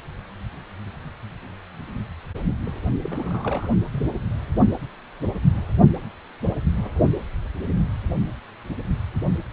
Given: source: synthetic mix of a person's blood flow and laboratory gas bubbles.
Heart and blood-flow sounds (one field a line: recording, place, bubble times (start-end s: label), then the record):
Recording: Doppler ultrasound of blood flow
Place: precordium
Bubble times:
2.66-2.70 s: bubbles
3.04-3.71 s: bubbles
3.93-4.16 s: bubbles
From the record:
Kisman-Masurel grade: 211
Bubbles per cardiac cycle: several, 3 to 8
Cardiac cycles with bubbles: 1 to 10%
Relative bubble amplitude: barely perceptible (0.100 to 0.250)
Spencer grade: 1 (occasional bubble signal discernible with the cardiac motion signal, with majority of cardiac periods free of bubbles)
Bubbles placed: anywhere in the cardiac cycle